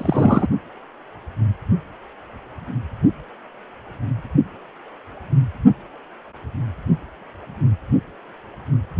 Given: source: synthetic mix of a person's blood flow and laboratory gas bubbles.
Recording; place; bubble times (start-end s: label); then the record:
Doppler ultrasound of blood flow; precordium
0.00-0.47 s: bubbles
From the record:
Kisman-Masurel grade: 213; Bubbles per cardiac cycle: several, 3 to 8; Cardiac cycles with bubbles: 1 to 10%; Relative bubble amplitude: loud (0.450 to 0.775); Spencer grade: 1 (occasional bubble signal discernible with the cardiac motion signal, with majority of cardiac periods free of bubbles); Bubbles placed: only in the low amplitude regions of the cardiac cycle